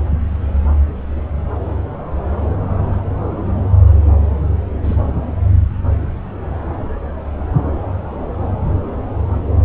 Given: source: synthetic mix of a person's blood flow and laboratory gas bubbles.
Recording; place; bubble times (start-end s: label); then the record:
Doppler ultrasound of blood flow; subclavian vein
4.83-4.96 s: bubbles
From the record:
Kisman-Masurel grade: 111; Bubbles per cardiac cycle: 1 to 2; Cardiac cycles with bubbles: 1 to 10%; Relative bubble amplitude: barely perceptible (0.100 to 0.250); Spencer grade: 1 (occasional bubble signal discernible with the cardiac motion signal, with majority of cardiac periods free of bubbles); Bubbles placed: anywhere in the cardiac cycle